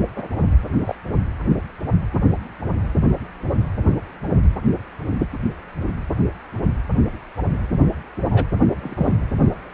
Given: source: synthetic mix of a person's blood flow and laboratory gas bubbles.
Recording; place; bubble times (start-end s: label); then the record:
Doppler ultrasound of blood flow; precordium
0.15-0.28 s: bubbles
0.85-0.95 s: bubbles
8.23-8.46 s: bubbles
8.81-9.15 s: bubbles
From the record:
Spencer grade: 2 (many but less than half of the cardiac periods contain bubble signals, singularly or in groups); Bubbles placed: anywhere in the cardiac cycle